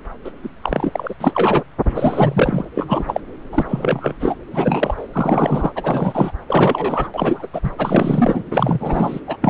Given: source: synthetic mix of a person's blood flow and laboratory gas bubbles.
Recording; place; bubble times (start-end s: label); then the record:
Doppler ultrasound of blood flow; subclavian vein
0.24-0.31 s: bubbles
0.42-0.49 s: bubbles
0.62-1.14 s: bubbles
1.20-1.64 s: bubbles
1.85-2.65 s: bubbles
2.75-3.21 s: bubbles
3.52-4.13 s: bubbles
4.20-4.36 s: bubbles
4.53-5.07 s: bubbles
5.13-5.71 s: bubbles
5.75-6.32 s: bubbles
6.47-7.11 s: bubbles
7.14-7.47 s: bubbles
7.53-7.60 s: bubbles
7.63-7.71 s: bubbles
7.78-8.43 s: bubbles
8.51-9.20 s: bubbles
9.28-9.37 s: bubbles
9.42-9.50 s: bubbles
From the record:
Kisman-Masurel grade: 343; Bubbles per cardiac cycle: rolling drumbeat, 9 or more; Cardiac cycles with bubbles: 100%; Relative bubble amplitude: loud (0.450 to 0.775); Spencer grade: 3 (all of the cardiac periods contain showers or single bubble signals, but not dominating or overriding the cardiac motion signals); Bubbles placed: anywhere in the cardiac cycle